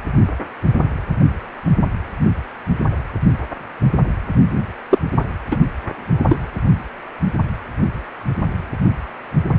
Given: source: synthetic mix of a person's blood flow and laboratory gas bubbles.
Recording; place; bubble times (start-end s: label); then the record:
Doppler ultrasound of blood flow; precordium
4.90-4.98 s: bubbles
5.50-5.57 s: bubbles
6.28-6.38 s: bubbles
From the record:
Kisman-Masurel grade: 123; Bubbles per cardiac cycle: 1 to 2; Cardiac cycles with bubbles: 10 to 50%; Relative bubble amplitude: loud (0.450 to 0.775); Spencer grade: 2 (many but less than half of the cardiac periods contain bubble signals, singularly or in groups); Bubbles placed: anywhere in the cardiac cycle